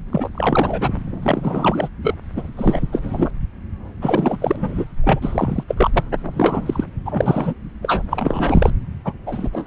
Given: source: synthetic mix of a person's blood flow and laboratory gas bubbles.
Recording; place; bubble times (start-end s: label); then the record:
Doppler ultrasound of blood flow; subclavian vein
0.11-0.29 s: bubbles
0.34-0.89 s: bubbles
1.22-1.89 s: bubbles
2.03-2.15 s: bubbles
2.36-2.42 s: bubbles
2.57-2.81 s: bubbles
2.92-3.00 s: bubbles
3.03-3.30 s: bubbles
4.01-4.37 s: bubbles
4.41-4.85 s: bubbles
5.04-5.64 s: bubbles
5.68-6.04 s: bubbles
6.33-6.84 s: bubbles
7.06-7.54 s: bubbles
7.83-8.02 s: bubbles
8.10-8.72 s: bubbles
9.04-9.13 s: bubbles
9.26-9.49 s: bubbles
9.52-9.67 s: bubbles
From the record:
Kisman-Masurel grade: 342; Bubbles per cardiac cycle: rolling drumbeat, 9 or more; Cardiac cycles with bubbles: 100%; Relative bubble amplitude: moderate (0.250 to 0.450); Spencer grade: 3 (all of the cardiac periods contain showers or single bubble signals, but not dominating or overriding the cardiac motion signals); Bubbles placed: anywhere in the cardiac cycle